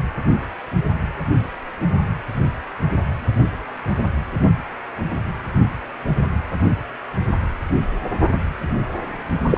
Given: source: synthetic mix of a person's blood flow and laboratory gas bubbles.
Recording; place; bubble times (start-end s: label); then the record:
Doppler ultrasound of blood flow; precordium
9.49-9.58 s: bubbles
From the record:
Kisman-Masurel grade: 213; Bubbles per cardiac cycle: several, 3 to 8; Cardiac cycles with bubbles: 1 to 10%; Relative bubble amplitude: loud (0.450 to 0.775); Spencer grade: 1 (occasional bubble signal discernible with the cardiac motion signal, with majority of cardiac periods free of bubbles); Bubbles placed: anywhere in the cardiac cycle